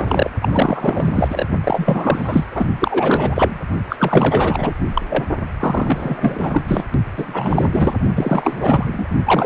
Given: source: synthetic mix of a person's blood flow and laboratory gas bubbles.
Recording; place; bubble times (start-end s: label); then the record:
Doppler ultrasound of blood flow; precordium
0.00-0.31 s: bubbles
0.41-1.46 s: bubbles
1.64-2.45 s: bubbles
2.50-2.65 s: bubbles
2.79-3.60 s: bubbles
3.88-4.74 s: bubbles
4.93-5.02 s: bubbles
5.09-5.24 s: bubbles
5.59-6.62 s: bubbles
6.67-6.84 s: bubbles
7.16-7.95 s: bubbles
8.15-9.09 s: bubbles
9.25-9.46 s: bubbles
From the record:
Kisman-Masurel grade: 444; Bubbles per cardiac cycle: continuous sound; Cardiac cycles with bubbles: 100%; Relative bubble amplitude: maximal (0.775 to 0.999); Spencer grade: 4 (maximum detectable bubble signal sounding continuously throughout systole and diastole of every cardiac period, and overriding the amplitude of the normal cardiac signals); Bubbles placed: only in the low amplitude regions of the cardiac cycle